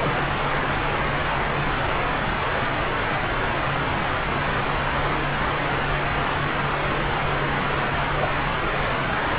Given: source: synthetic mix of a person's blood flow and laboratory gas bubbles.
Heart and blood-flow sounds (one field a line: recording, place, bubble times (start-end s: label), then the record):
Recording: Doppler ultrasound of blood flow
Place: subclavian vein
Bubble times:
0.00-0.24 s: bubbles
8.20-8.29 s: bubbles
9.17-9.23 s: bubbles
From the record:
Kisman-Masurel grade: 121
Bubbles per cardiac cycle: 1 to 2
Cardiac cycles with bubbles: 10 to 50%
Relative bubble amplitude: barely perceptible (0.100 to 0.250)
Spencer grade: 2 (many but less than half of the cardiac periods contain bubble signals, singularly or in groups)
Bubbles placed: anywhere in the cardiac cycle